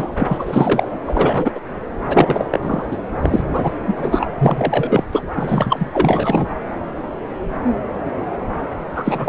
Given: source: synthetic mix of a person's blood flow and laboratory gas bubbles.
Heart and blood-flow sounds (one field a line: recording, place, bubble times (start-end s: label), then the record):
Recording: Doppler ultrasound of blood flow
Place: subclavian vein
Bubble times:
0.00-0.15 s: bubbles
0.18-0.88 s: bubbles
1.06-1.51 s: bubbles
1.54-1.60 s: bubbles
2.08-2.45 s: bubbles
2.51-2.85 s: bubbles
2.91-2.97 s: bubbles
3.23-3.43 s: bubbles
3.52-3.71 s: bubbles
3.87-4.25 s: bubbles
4.39-5.04 s: bubbles
5.12-5.22 s: bubbles
5.35-5.89 s: bubbles
5.93-6.46 s: bubbles
8.96-9.29 s: bubbles
From the record:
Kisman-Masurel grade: 333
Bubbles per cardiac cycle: rolling drumbeat, 9 or more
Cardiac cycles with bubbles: 50 to 99%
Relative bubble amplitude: loud (0.450 to 0.775)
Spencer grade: 3 (all of the cardiac periods contain showers or single bubble signals, but not dominating or overriding the cardiac motion signals)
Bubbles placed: anywhere in the cardiac cycle